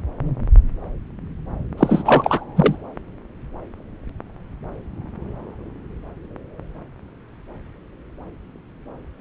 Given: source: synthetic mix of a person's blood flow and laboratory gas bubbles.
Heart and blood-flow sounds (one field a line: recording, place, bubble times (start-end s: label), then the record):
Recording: Doppler ultrasound of blood flow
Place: subclavian vein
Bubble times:
1.77-2.44 s: bubbles
2.56-2.76 s: bubbles
From the record:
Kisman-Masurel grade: 213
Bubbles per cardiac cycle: several, 3 to 8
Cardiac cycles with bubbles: 1 to 10%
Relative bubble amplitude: loud (0.450 to 0.775)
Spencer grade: 1 (occasional bubble signal discernible with the cardiac motion signal, with majority of cardiac periods free of bubbles)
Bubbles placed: anywhere in the cardiac cycle